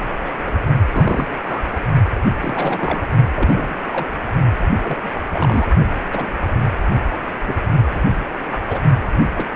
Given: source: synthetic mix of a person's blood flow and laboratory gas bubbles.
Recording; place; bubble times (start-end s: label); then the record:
Doppler ultrasound of blood flow; precordium
0.23-0.31 s: bubbles
0.46-0.53 s: bubbles
0.91-1.30 s: bubbles
1.43-1.80 s: bubbles
2.41-3.06 s: bubbles
3.35-3.75 s: bubbles
3.93-4.32 s: bubbles
4.83-4.97 s: bubbles
5.04-5.10 s: bubbles
5.29-5.67 s: bubbles
6.11-6.28 s: bubbles
7.10-7.16 s: bubbles
7.45-7.54 s: bubbles
7.91-8.02 s: bubbles
8.47-8.59 s: bubbles
8.68-8.79 s: bubbles
9.22-9.26 s: bubbles
9.35-9.46 s: bubbles
From the record:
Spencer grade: 3 (all of the cardiac periods contain showers or single bubble signals, but not dominating or overriding the cardiac motion signals); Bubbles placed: only in the low amplitude regions of the cardiac cycle